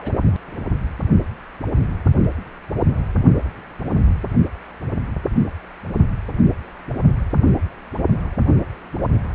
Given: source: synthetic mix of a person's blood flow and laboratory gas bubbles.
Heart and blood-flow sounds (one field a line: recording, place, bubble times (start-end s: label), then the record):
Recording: Doppler ultrasound of blood flow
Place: precordium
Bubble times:
0.00-0.21 s: bubbles
0.47-0.63 s: bubbles
From the record:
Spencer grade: 1 (occasional bubble signal discernible with the cardiac motion signal, with majority of cardiac periods free of bubbles)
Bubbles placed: only in the low amplitude regions of the cardiac cycle